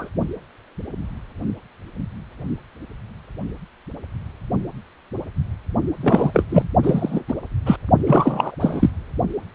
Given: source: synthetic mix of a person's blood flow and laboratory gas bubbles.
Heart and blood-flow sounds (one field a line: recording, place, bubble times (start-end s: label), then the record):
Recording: Doppler ultrasound of blood flow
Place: precordium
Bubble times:
0.00-0.09 s: bubbles
6.00-6.44 s: bubbles
6.50-6.69 s: bubbles
6.83-7.21 s: bubbles
7.28-7.33 s: bubbles
7.66-7.76 s: bubbles
8.06-8.55 s: bubbles
8.60-8.90 s: bubbles
From the record:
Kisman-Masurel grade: 233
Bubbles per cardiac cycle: several, 3 to 8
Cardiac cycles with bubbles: 50 to 99%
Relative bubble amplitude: loud (0.450 to 0.775)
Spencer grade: 3 (all of the cardiac periods contain showers or single bubble signals, but not dominating or overriding the cardiac motion signals)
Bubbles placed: only in the low amplitude regions of the cardiac cycle